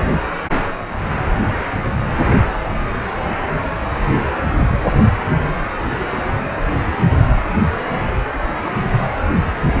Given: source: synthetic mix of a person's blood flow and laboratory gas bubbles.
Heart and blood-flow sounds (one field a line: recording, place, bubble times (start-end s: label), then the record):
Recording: Doppler ultrasound of blood flow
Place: precordium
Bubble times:
no bubbles
From the record:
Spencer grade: 0 (complete lack of bubble signals)